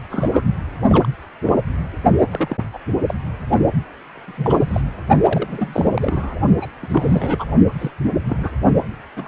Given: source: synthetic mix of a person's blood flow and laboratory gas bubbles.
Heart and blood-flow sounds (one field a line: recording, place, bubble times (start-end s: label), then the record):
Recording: Doppler ultrasound of blood flow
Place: precordium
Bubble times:
0.10-0.43 s: bubbles
0.89-1.06 s: bubbles
1.47-1.53 s: bubbles
2.30-2.57 s: bubbles
2.73-2.79 s: bubbles
3.07-3.14 s: bubbles
4.13-4.82 s: bubbles
5.20-6.41 s: bubbles
6.62-6.70 s: bubbles
6.82-7.45 s: bubbles
7.79-7.91 s: bubbles
8.29-8.51 s: bubbles
9.16-9.28 s: bubbles
From the record:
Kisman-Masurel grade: 242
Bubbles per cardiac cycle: several, 3 to 8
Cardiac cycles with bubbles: 100%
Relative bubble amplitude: moderate (0.250 to 0.450)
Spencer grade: 3 (all of the cardiac periods contain showers or single bubble signals, but not dominating or overriding the cardiac motion signals)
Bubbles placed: only in the low amplitude regions of the cardiac cycle